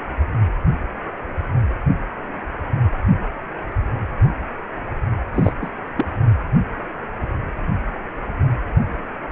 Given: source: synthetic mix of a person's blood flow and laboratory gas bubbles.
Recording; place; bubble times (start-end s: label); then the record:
Doppler ultrasound of blood flow; precordium
5.35-5.53 s: bubbles
5.62-5.70 s: bubbles
5.97-6.06 s: bubbles
From the record:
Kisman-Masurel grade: 212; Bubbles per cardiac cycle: several, 3 to 8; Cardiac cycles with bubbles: 1 to 10%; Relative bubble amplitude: moderate (0.250 to 0.450); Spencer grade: 1 (occasional bubble signal discernible with the cardiac motion signal, with majority of cardiac periods free of bubbles); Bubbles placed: anywhere in the cardiac cycle